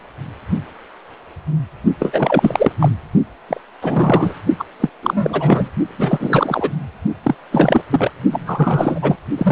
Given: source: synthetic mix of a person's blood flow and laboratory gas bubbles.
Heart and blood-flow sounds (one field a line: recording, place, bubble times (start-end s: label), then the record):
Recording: Doppler ultrasound of blood flow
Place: precordium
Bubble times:
2.00-2.72 s: bubbles
2.79-2.90 s: bubbles
3.48-3.60 s: bubbles
3.81-4.33 s: bubbles
4.58-4.65 s: bubbles
4.80-4.89 s: bubbles
5.03-5.70 s: bubbles
5.88-6.71 s: bubbles
7.23-7.35 s: bubbles
7.50-7.85 s: bubbles
7.89-8.11 s: bubbles
8.31-9.15 s: bubbles
9.37-9.52 s: bubbles
From the record:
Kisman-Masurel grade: 333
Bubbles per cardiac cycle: rolling drumbeat, 9 or more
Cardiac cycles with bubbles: 50 to 99%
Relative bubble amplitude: loud (0.450 to 0.775)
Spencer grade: 3 (all of the cardiac periods contain showers or single bubble signals, but not dominating or overriding the cardiac motion signals)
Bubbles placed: only in the low amplitude regions of the cardiac cycle